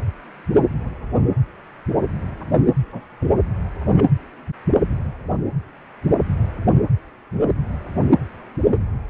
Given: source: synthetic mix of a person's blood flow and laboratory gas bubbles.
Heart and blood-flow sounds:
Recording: Doppler ultrasound of blood flow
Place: precordium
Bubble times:
2.92-3.01 s: bubbles
3.21-3.31 s: bubbles
3.81-4.06 s: bubbles
From the record:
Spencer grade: 1 (occasional bubble signal discernible with the cardiac motion signal, with majority of cardiac periods free of bubbles)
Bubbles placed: anywhere in the cardiac cycle

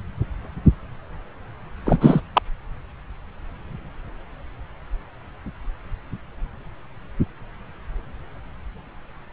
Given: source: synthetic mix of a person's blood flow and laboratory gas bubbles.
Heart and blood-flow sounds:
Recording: Doppler ultrasound of blood flow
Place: subclavian vein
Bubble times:
1.85-2.22 s: bubbles
2.35-2.42 s: bubbles
From the record:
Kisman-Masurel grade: 223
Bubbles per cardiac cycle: several, 3 to 8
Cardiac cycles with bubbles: 10 to 50%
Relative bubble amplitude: loud (0.450 to 0.775)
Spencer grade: 2 (many but less than half of the cardiac periods contain bubble signals, singularly or in groups)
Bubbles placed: anywhere in the cardiac cycle

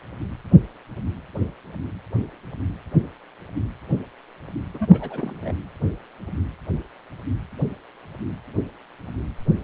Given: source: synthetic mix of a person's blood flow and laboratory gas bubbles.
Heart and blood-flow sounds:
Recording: Doppler ultrasound of blood flow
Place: precordium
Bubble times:
4.74-5.54 s: bubbles
From the record:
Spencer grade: 1 (occasional bubble signal discernible with the cardiac motion signal, with majority of cardiac periods free of bubbles)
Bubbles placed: anywhere in the cardiac cycle

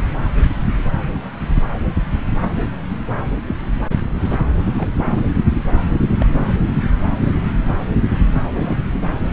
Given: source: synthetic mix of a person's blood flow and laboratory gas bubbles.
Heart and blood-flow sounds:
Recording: Doppler ultrasound of blood flow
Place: subclavian vein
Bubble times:
2.56-2.67 s: bubbles
3.45-3.56 s: bubbles
4.78-4.88 s: bubbles
5.17-5.22 s: bubbles
6.20-6.26 s: bubbles
8.54-8.77 s: bubbles
From the record:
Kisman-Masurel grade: 121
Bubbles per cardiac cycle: 1 to 2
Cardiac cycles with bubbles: 10 to 50%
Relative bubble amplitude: barely perceptible (0.100 to 0.250)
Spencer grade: 2 (many but less than half of the cardiac periods contain bubble signals, singularly or in groups)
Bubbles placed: anywhere in the cardiac cycle

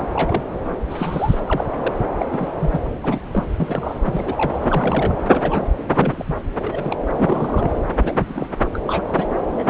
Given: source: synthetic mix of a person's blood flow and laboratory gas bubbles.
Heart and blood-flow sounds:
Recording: Doppler ultrasound of blood flow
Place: subclavian vein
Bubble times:
0.12-0.43 s: bubbles
0.90-1.40 s: bubbles
1.47-1.67 s: bubbles
1.76-1.97 s: bubbles
2.19-2.49 s: bubbles
2.58-2.81 s: bubbles
3.02-3.20 s: bubbles
3.33-3.44 s: bubbles
3.51-3.54 s: bubbles
3.57-4.00 s: bubbles
4.05-4.59 s: bubbles
4.62-5.15 s: bubbles
5.30-5.67 s: bubbles
5.84-6.36 s: bubbles
6.59-6.96 s: bubbles
7.13-7.74 s: bubbles
8.00-8.48 s: bubbles
8.73-9.26 s: bubbles
9.58-9.70 s: bubbles
From the record:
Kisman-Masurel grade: 242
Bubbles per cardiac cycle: several, 3 to 8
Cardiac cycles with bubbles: 100%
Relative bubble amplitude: moderate (0.250 to 0.450)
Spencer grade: 3 (all of the cardiac periods contain showers or single bubble signals, but not dominating or overriding the cardiac motion signals)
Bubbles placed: anywhere in the cardiac cycle

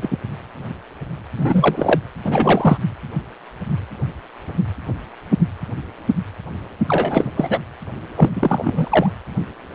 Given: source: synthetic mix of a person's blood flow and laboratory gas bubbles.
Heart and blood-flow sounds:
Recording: Doppler ultrasound of blood flow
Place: precordium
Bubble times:
0.00-0.18 s: bubbles
1.36-1.99 s: bubbles
2.25-2.78 s: bubbles
6.88-7.31 s: bubbles
7.36-7.59 s: bubbles
8.16-8.30 s: bubbles
8.35-9.12 s: bubbles
From the record:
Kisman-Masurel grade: 233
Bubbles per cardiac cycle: several, 3 to 8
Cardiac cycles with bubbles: 50 to 99%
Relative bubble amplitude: loud (0.450 to 0.775)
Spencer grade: 3 (all of the cardiac periods contain showers or single bubble signals, but not dominating or overriding the cardiac motion signals)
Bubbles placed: anywhere in the cardiac cycle

